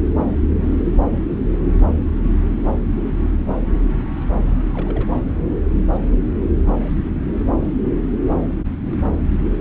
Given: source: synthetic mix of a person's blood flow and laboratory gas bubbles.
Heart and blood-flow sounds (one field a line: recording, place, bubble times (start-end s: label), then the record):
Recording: Doppler ultrasound of blood flow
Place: subclavian vein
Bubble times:
4.46-5.09 s: bubbles
From the record:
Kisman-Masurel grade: 211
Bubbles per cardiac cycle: several, 3 to 8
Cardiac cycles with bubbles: 1 to 10%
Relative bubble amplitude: barely perceptible (0.100 to 0.250)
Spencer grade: 1 (occasional bubble signal discernible with the cardiac motion signal, with majority of cardiac periods free of bubbles)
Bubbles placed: anywhere in the cardiac cycle